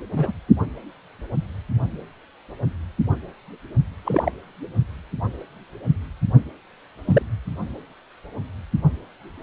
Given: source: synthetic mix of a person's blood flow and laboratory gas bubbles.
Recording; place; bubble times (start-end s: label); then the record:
Doppler ultrasound of blood flow; precordium
0.16-0.32 s: bubbles
4.05-4.31 s: bubbles
7.05-7.22 s: bubbles
From the record:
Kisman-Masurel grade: 122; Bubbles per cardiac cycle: 1 to 2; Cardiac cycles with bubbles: 10 to 50%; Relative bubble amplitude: moderate (0.250 to 0.450); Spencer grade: 2 (many but less than half of the cardiac periods contain bubble signals, singularly or in groups); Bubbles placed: only in the low amplitude regions of the cardiac cycle